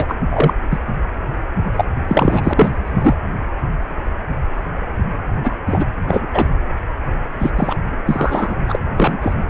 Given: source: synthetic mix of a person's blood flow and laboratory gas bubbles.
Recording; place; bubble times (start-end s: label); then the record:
Doppler ultrasound of blood flow; precordium
0.00-0.05 s: bubbles
0.09-0.15 s: bubbles
0.29-0.54 s: bubbles
0.71-0.79 s: bubbles
1.77-1.84 s: bubbles
2.07-3.15 s: bubbles
5.43-5.51 s: bubbles
5.66-5.85 s: bubbles
6.08-6.27 s: bubbles
6.33-6.47 s: bubbles
7.38-7.51 s: bubbles
7.56-7.78 s: bubbles
8.07-8.58 s: bubbles
8.67-8.79 s: bubbles
8.97-9.34 s: bubbles
From the record:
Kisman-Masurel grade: 233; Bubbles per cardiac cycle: several, 3 to 8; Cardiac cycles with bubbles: 50 to 99%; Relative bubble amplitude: loud (0.450 to 0.775); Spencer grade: 3 (all of the cardiac periods contain showers or single bubble signals, but not dominating or overriding the cardiac motion signals); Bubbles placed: anywhere in the cardiac cycle